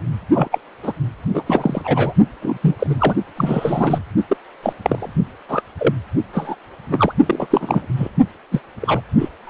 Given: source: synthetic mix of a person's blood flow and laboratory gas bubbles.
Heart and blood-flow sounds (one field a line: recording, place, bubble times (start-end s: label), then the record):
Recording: Doppler ultrasound of blood flow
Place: precordium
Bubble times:
0.33-0.48 s: bubbles
0.51-0.58 s: bubbles
0.83-0.93 s: bubbles
1.33-1.44 s: bubbles
1.46-1.82 s: bubbles
1.84-2.13 s: bubbles
2.42-2.58 s: bubbles
2.62-2.75 s: bubbles
2.79-2.95 s: bubbles
2.99-3.14 s: bubbles
3.37-3.98 s: bubbles
4.29-4.36 s: bubbles
4.62-4.73 s: bubbles
4.82-5.13 s: bubbles
5.48-5.61 s: bubbles
5.79-5.94 s: bubbles
6.33-6.55 s: bubbles
6.90-7.12 s: bubbles
7.25-7.46 s: bubbles
7.50-7.87 s: bubbles
7.96-8.11 s: bubbles
8.52-8.60 s: bubbles
8.81-9.01 s: bubbles
9.18-9.29 s: bubbles
9.45-9.50 s: bubbles
From the record:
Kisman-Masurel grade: 243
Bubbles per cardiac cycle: several, 3 to 8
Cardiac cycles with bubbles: 100%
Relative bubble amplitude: loud (0.450 to 0.775)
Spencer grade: 3 (all of the cardiac periods contain showers or single bubble signals, but not dominating or overriding the cardiac motion signals)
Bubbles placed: only in the low amplitude regions of the cardiac cycle